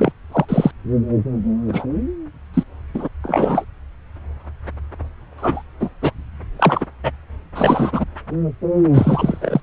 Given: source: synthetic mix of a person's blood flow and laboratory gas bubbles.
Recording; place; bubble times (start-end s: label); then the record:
Doppler ultrasound of blood flow; subclavian vein
0.00-0.12 s: bubbles
0.32-0.45 s: bubbles
0.48-0.71 s: bubbles
1.68-1.85 s: bubbles
2.54-2.63 s: bubbles
2.94-3.08 s: bubbles
3.22-3.65 s: bubbles
5.37-5.62 s: bubbles
5.79-5.89 s: bubbles
6.01-6.11 s: bubbles
6.58-6.85 s: bubbles
7.03-7.11 s: bubbles
7.54-8.04 s: bubbles
8.93-9.61 s: bubbles
From the record:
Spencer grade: 3 (all of the cardiac periods contain showers or single bubble signals, but not dominating or overriding the cardiac motion signals); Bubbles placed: anywhere in the cardiac cycle